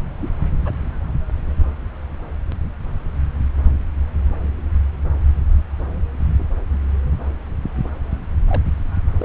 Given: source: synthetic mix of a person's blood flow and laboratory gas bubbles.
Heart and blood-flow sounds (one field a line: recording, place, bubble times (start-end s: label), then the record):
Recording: Doppler ultrasound of blood flow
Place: subclavian vein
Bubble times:
0.21-0.29 s: bubbles
0.65-0.71 s: bubbles
8.48-8.62 s: bubbles
9.13-9.25 s: bubbles
From the record:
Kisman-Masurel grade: 121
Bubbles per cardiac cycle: 1 to 2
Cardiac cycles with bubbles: 10 to 50%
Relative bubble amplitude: barely perceptible (0.100 to 0.250)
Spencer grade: 2 (many but less than half of the cardiac periods contain bubble signals, singularly or in groups)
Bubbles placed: anywhere in the cardiac cycle